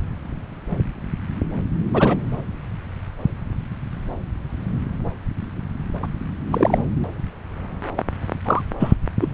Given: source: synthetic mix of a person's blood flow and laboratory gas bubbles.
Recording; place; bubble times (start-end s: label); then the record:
Doppler ultrasound of blood flow; subclavian vein
1.92-2.17 s: bubbles
6.03-6.07 s: bubbles
6.50-6.78 s: bubbles
7.96-8.03 s: bubbles
8.45-8.62 s: bubbles
8.79-8.94 s: bubbles
9.20-9.28 s: bubbles
From the record:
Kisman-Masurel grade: 123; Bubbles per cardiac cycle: 1 to 2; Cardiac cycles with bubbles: 10 to 50%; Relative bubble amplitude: loud (0.450 to 0.775); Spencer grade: 2 (many but less than half of the cardiac periods contain bubble signals, singularly or in groups); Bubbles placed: anywhere in the cardiac cycle